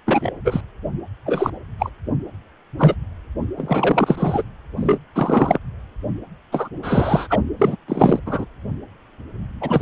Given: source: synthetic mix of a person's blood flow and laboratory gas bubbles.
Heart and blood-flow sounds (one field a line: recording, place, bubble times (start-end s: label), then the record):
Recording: Doppler ultrasound of blood flow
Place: precordium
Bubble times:
0.06-0.31 s: bubbles
0.44-0.61 s: bubbles
1.25-1.50 s: bubbles
1.79-1.90 s: bubbles
2.79-2.95 s: bubbles
3.57-4.43 s: bubbles
4.75-4.99 s: bubbles
5.15-5.58 s: bubbles
6.51-6.69 s: bubbles
6.83-7.27 s: bubbles
7.29-7.40 s: bubbles
7.59-7.76 s: bubbles
7.88-8.19 s: bubbles
8.26-8.46 s: bubbles
9.61-9.82 s: bubbles
From the record:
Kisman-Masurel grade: 233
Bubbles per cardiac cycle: several, 3 to 8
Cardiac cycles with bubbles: 50 to 99%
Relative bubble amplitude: loud (0.450 to 0.775)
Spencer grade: 3 (all of the cardiac periods contain showers or single bubble signals, but not dominating or overriding the cardiac motion signals)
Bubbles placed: anywhere in the cardiac cycle